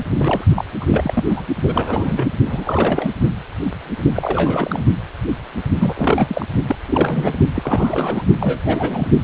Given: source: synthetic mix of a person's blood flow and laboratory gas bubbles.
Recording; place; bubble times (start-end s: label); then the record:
Doppler ultrasound of blood flow; precordium
0.00-0.04 s: bubbles
0.17-0.44 s: bubbles
0.56-0.65 s: bubbles
0.81-1.24 s: bubbles
1.29-1.44 s: bubbles
1.65-2.30 s: bubbles
2.45-3.10 s: bubbles
4.14-4.84 s: bubbles
5.79-6.46 s: bubbles
6.67-6.76 s: bubbles
6.88-7.37 s: bubbles
7.55-8.22 s: bubbles
8.39-9.07 s: bubbles
From the record:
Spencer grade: 3 (all of the cardiac periods contain showers or single bubble signals, but not dominating or overriding the cardiac motion signals); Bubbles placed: only in the low amplitude regions of the cardiac cycle